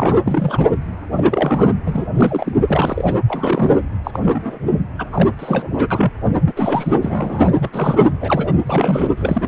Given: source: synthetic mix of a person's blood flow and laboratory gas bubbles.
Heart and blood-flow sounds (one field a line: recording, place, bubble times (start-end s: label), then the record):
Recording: Doppler ultrasound of blood flow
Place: precordium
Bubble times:
0.00-0.17 s: bubbles
0.26-0.68 s: bubbles
1.12-1.71 s: bubbles
1.86-2.06 s: bubbles
2.17-2.53 s: bubbles
2.67-3.17 s: bubbles
3.28-3.82 s: bubbles
4.04-4.20 s: bubbles
4.25-4.58 s: bubbles
4.98-5.06 s: bubbles
5.12-5.31 s: bubbles
5.39-5.86 s: bubbles
5.91-6.12 s: bubbles
6.46-6.53 s: bubbles
6.56-6.92 s: bubbles
7.02-7.54 s: bubbles
7.61-7.70 s: bubbles
7.73-8.12 s: bubbles
8.20-8.53 s: bubbles
8.66-9.14 s: bubbles
9.16-9.48 s: bubbles
From the record:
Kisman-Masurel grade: 242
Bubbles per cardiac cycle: several, 3 to 8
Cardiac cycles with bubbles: 100%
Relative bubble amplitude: moderate (0.250 to 0.450)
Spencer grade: 3 (all of the cardiac periods contain showers or single bubble signals, but not dominating or overriding the cardiac motion signals)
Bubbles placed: anywhere in the cardiac cycle